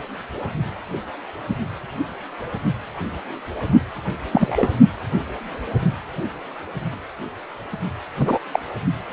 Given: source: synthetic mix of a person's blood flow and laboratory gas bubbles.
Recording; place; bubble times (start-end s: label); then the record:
Doppler ultrasound of blood flow; precordium
4.32-4.68 s: bubbles
8.18-8.38 s: bubbles
8.53-8.60 s: bubbles
From the record:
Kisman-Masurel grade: 123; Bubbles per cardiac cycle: 1 to 2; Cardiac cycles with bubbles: 10 to 50%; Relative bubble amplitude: loud (0.450 to 0.775); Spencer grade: 2 (many but less than half of the cardiac periods contain bubble signals, singularly or in groups); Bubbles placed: only in the low amplitude regions of the cardiac cycle